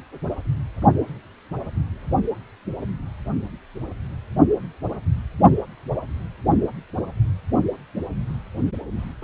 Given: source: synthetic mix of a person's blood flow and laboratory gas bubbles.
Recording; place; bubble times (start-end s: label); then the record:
Doppler ultrasound of blood flow; precordium
9.22-9.24 s: bubbles
From the record:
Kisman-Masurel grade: 112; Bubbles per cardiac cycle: 1 to 2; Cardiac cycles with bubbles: 1 to 10%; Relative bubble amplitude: moderate (0.250 to 0.450); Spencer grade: 1 (occasional bubble signal discernible with the cardiac motion signal, with majority of cardiac periods free of bubbles); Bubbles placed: only in the low amplitude regions of the cardiac cycle